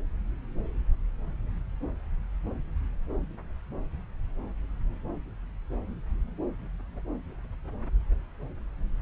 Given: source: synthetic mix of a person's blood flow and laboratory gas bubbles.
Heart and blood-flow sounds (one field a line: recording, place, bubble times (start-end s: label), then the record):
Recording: Doppler ultrasound of blood flow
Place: subclavian vein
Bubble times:
no bubbles
From the record:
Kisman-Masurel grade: 000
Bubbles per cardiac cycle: 0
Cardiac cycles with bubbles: 0%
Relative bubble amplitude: no bubbles discernible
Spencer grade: 0 (complete lack of bubble signals)